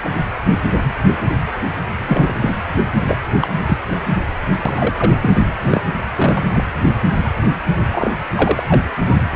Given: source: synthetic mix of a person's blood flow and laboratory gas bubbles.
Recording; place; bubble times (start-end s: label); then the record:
Doppler ultrasound of blood flow; precordium
0.04-0.09 s: bubbles
2.06-2.50 s: bubbles
3.08-3.16 s: bubbles
3.42-3.48 s: bubbles
3.66-3.77 s: bubbles
4.65-4.74 s: bubbles
4.76-5.32 s: bubbles
5.61-5.81 s: bubbles
6.15-6.45 s: bubbles
6.52-6.64 s: bubbles
7.24-7.30 s: bubbles
7.91-8.12 s: bubbles
8.35-8.63 s: bubbles
8.68-8.81 s: bubbles
From the record:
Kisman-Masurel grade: 243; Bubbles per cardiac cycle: several, 3 to 8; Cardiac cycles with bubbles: 100%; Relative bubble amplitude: loud (0.450 to 0.775); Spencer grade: 3 (all of the cardiac periods contain showers or single bubble signals, but not dominating or overriding the cardiac motion signals); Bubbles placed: anywhere in the cardiac cycle